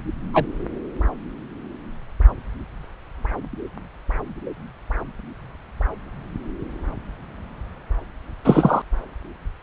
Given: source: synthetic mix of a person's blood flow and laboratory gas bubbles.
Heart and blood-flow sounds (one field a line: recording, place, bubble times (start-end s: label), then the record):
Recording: Doppler ultrasound of blood flow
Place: subclavian vein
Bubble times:
0.33-0.46 s: bubbles
8.45-8.82 s: bubbles
From the record:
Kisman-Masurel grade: 123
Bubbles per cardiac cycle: 1 to 2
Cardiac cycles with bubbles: 10 to 50%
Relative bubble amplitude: loud (0.450 to 0.775)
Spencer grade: 2 (many but less than half of the cardiac periods contain bubble signals, singularly or in groups)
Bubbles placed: anywhere in the cardiac cycle